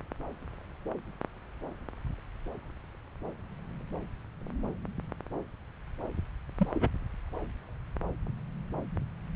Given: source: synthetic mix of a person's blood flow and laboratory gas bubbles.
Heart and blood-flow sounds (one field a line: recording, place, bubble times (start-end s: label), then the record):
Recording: Doppler ultrasound of blood flow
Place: subclavian vein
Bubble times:
6.59-6.67 s: bubbles
6.75-6.88 s: bubbles
From the record:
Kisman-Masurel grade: 111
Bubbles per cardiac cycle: 1 to 2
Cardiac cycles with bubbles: 1 to 10%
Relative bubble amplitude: barely perceptible (0.100 to 0.250)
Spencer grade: 1 (occasional bubble signal discernible with the cardiac motion signal, with majority of cardiac periods free of bubbles)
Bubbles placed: anywhere in the cardiac cycle